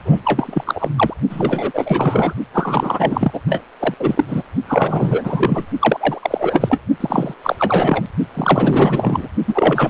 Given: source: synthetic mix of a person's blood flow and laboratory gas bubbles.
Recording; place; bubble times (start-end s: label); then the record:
Doppler ultrasound of blood flow; precordium
0.04-0.20 s: bubbles
0.24-0.89 s: bubbles
0.96-1.14 s: bubbles
1.29-2.33 s: bubbles
2.54-3.40 s: bubbles
3.47-3.62 s: bubbles
3.80-3.94 s: bubbles
3.99-4.43 s: bubbles
4.67-5.66 s: bubbles
5.79-6.81 s: bubbles
7.00-7.34 s: bubbles
7.43-7.56 s: bubbles
7.58-8.03 s: bubbles
8.33-9.28 s: bubbles
9.47-9.90 s: bubbles
From the record:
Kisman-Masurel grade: 444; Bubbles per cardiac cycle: continuous sound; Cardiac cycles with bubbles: 100%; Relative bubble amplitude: maximal (0.775 to 0.999); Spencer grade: 4 (maximum detectable bubble signal sounding continuously throughout systole and diastole of every cardiac period, and overriding the amplitude of the normal cardiac signals); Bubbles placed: only in the low amplitude regions of the cardiac cycle